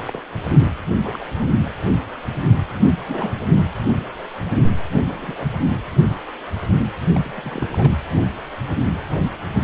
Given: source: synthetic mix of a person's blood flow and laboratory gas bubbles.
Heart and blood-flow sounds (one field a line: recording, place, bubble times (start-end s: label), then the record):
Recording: Doppler ultrasound of blood flow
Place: precordium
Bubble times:
0.07-0.22 s: bubbles
1.02-1.19 s: bubbles
1.38-1.52 s: bubbles
2.99-3.40 s: bubbles
3.54-3.74 s: bubbles
4.97-5.01 s: bubbles
5.08-5.47 s: bubbles
7.15-7.20 s: bubbles
7.23-7.92 s: bubbles
From the record:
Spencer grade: 2 (many but less than half of the cardiac periods contain bubble signals, singularly or in groups)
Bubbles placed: anywhere in the cardiac cycle